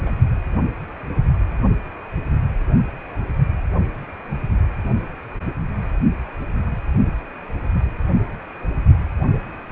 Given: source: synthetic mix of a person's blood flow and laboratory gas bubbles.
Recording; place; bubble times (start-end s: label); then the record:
Doppler ultrasound of blood flow; precordium
0.00-0.03 s: bubbles
0.06-0.11 s: bubbles
From the record:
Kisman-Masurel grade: 211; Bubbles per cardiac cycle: several, 3 to 8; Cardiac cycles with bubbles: 1 to 10%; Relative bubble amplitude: barely perceptible (0.100 to 0.250); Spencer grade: 1 (occasional bubble signal discernible with the cardiac motion signal, with majority of cardiac periods free of bubbles); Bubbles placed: only in the low amplitude regions of the cardiac cycle